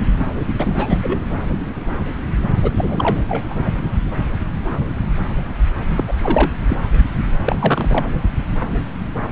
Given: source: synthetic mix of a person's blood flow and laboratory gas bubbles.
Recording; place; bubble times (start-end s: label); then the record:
Doppler ultrasound of blood flow; subclavian vein
0.59-0.99 s: bubbles
1.02-1.20 s: bubbles
2.62-2.71 s: bubbles
2.76-3.20 s: bubbles
3.29-3.70 s: bubbles
5.96-6.04 s: bubbles
6.08-6.12 s: bubbles
6.21-6.52 s: bubbles
6.69-6.77 s: bubbles
7.45-8.08 s: bubbles
From the record:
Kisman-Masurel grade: 222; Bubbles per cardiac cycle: several, 3 to 8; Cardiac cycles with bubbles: 10 to 50%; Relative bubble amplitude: moderate (0.250 to 0.450); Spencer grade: 2 (many but less than half of the cardiac periods contain bubble signals, singularly or in groups); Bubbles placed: anywhere in the cardiac cycle